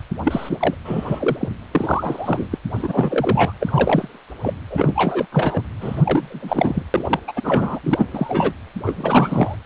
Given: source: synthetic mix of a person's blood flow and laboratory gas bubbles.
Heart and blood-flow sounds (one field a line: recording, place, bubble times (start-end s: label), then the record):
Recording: Doppler ultrasound of blood flow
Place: precordium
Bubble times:
0.23-0.74 s: bubbles
0.84-1.37 s: bubbles
1.40-1.49 s: bubbles
1.71-2.48 s: bubbles
2.51-2.58 s: bubbles
2.76-3.53 s: bubbles
3.59-4.19 s: bubbles
4.42-4.54 s: bubbles
4.70-5.26 s: bubbles
5.32-5.62 s: bubbles
5.80-6.83 s: bubbles
6.94-7.20 s: bubbles
7.27-7.33 s: bubbles
7.35-7.79 s: bubbles
7.83-8.08 s: bubbles
8.11-8.53 s: bubbles
8.86-9.57 s: bubbles
From the record:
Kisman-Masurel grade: 343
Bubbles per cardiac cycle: rolling drumbeat, 9 or more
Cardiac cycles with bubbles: 100%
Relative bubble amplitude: loud (0.450 to 0.775)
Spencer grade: 3 (all of the cardiac periods contain showers or single bubble signals, but not dominating or overriding the cardiac motion signals)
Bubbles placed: anywhere in the cardiac cycle